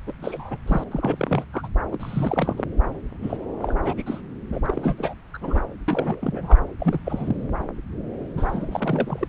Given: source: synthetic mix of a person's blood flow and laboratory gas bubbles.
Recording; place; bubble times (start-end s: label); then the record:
Doppler ultrasound of blood flow; subclavian vein
0.07-0.12 s: bubbles
0.22-0.57 s: bubbles
0.67-0.84 s: bubbles
0.91-1.45 s: bubbles
1.53-1.68 s: bubbles
1.92-2.64 s: bubbles
3.22-3.37 s: bubbles
3.62-3.75 s: bubbles
3.83-3.95 s: bubbles
3.97-4.04 s: bubbles
4.06-4.21 s: bubbles
4.52-4.60 s: bubbles
4.64-5.15 s: bubbles
5.33-5.38 s: bubbles
5.41-5.60 s: bubbles
5.88-6.58 s: bubbles
6.80-7.00 s: bubbles
7.04-7.50 s: bubbles
8.37-9.27 s: bubbles
From the record:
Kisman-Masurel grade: 342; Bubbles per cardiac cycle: rolling drumbeat, 9 or more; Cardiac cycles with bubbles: 100%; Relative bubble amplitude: moderate (0.250 to 0.450); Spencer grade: 3 (all of the cardiac periods contain showers or single bubble signals, but not dominating or overriding the cardiac motion signals); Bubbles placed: anywhere in the cardiac cycle